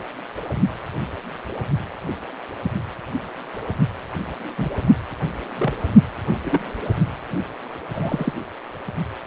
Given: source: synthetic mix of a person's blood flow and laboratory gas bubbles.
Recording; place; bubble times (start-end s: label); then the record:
Doppler ultrasound of blood flow; precordium
4.58-4.70 s: bubbles
5.46-5.73 s: bubbles
6.45-6.59 s: bubbles
7.94-8.33 s: bubbles
From the record:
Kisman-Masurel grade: 122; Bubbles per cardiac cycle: 1 to 2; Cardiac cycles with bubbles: 10 to 50%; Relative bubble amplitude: moderate (0.250 to 0.450); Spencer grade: 2 (many but less than half of the cardiac periods contain bubble signals, singularly or in groups); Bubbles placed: only in the low amplitude regions of the cardiac cycle